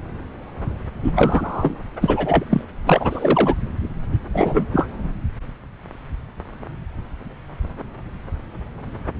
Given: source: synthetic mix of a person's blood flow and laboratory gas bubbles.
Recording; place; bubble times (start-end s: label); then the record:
Doppler ultrasound of blood flow; subclavian vein
1.04-1.12 s: bubbles
1.15-1.77 s: bubbles
2.01-2.44 s: bubbles
2.50-2.61 s: bubbles
2.86-3.55 s: bubbles
4.33-4.66 s: bubbles
4.72-4.88 s: bubbles
From the record:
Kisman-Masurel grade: 223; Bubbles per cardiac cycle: several, 3 to 8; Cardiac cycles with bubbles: 10 to 50%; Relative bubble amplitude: loud (0.450 to 0.775); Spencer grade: 2 (many but less than half of the cardiac periods contain bubble signals, singularly or in groups); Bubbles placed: anywhere in the cardiac cycle